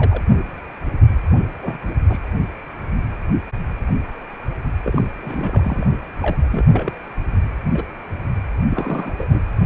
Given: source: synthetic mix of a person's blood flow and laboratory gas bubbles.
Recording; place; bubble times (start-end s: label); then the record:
Doppler ultrasound of blood flow; precordium
0.00-0.23 s: bubbles
1.61-1.78 s: bubbles
2.09-2.18 s: bubbles
4.83-5.08 s: bubbles
5.21-5.84 s: bubbles
6.22-6.37 s: bubbles
6.51-6.65 s: bubbles
6.72-6.93 s: bubbles
7.73-7.83 s: bubbles
8.71-9.13 s: bubbles
9.18-9.42 s: bubbles
From the record:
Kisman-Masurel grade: 232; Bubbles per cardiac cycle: several, 3 to 8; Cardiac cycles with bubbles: 50 to 99%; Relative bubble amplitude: moderate (0.250 to 0.450); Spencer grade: 3 (all of the cardiac periods contain showers or single bubble signals, but not dominating or overriding the cardiac motion signals); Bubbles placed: anywhere in the cardiac cycle